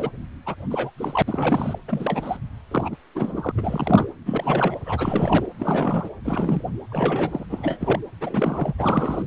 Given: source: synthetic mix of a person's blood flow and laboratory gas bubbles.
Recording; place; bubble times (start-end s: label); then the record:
Doppler ultrasound of blood flow; precordium
0.00-0.10 s: bubbles
0.46-0.55 s: bubbles
0.71-0.91 s: bubbles
0.98-1.23 s: bubbles
1.27-1.79 s: bubbles
1.88-2.38 s: bubbles
2.71-2.96 s: bubbles
3.15-3.51 s: bubbles
3.55-4.06 s: bubbles
4.26-4.75 s: bubbles
4.84-5.46 s: bubbles
5.59-6.09 s: bubbles
6.24-6.62 s: bubbles
6.89-7.46 s: bubbles
7.50-8.00 s: bubbles
8.21-8.73 s: bubbles
8.78-9.22 s: bubbles
From the record:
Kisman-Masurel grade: 342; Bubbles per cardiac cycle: rolling drumbeat, 9 or more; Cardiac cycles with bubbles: 100%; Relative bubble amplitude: moderate (0.250 to 0.450); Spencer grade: 3 (all of the cardiac periods contain showers or single bubble signals, but not dominating or overriding the cardiac motion signals); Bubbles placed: anywhere in the cardiac cycle